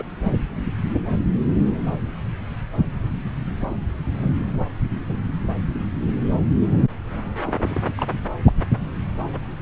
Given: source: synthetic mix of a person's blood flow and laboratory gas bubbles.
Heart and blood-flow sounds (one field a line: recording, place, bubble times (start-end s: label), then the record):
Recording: Doppler ultrasound of blood flow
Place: subclavian vein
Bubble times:
0.00-0.02 s: bubbles
3.61-3.76 s: bubbles
4.17-4.31 s: bubbles
5.08-5.17 s: bubbles
7.45-7.81 s: bubbles
7.97-8.06 s: bubbles
8.46-8.52 s: bubbles
9.32-9.40 s: bubbles
From the record:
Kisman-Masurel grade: 121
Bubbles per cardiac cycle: 1 to 2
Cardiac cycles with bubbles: 10 to 50%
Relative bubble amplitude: barely perceptible (0.100 to 0.250)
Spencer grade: 2 (many but less than half of the cardiac periods contain bubble signals, singularly or in groups)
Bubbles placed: anywhere in the cardiac cycle